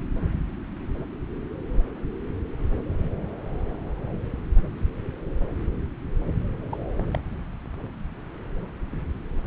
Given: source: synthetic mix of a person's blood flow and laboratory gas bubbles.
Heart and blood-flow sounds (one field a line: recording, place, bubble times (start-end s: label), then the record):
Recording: Doppler ultrasound of blood flow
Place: subclavian vein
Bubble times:
6.72-6.77 s: bubbles
6.98-7.03 s: bubbles
7.12-7.19 s: bubbles
From the record:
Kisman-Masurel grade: 221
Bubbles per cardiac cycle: several, 3 to 8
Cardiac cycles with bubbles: 10 to 50%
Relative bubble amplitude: barely perceptible (0.100 to 0.250)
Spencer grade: 2 (many but less than half of the cardiac periods contain bubble signals, singularly or in groups)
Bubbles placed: anywhere in the cardiac cycle